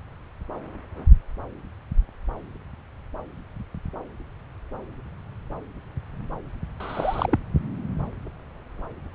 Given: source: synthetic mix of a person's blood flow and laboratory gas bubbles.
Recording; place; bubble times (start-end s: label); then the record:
Doppler ultrasound of blood flow; subclavian vein
6.80-7.38 s: bubbles
From the record:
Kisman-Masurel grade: 112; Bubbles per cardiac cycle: 1 to 2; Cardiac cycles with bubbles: 1 to 10%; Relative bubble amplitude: moderate (0.250 to 0.450); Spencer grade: 1 (occasional bubble signal discernible with the cardiac motion signal, with majority of cardiac periods free of bubbles); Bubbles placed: anywhere in the cardiac cycle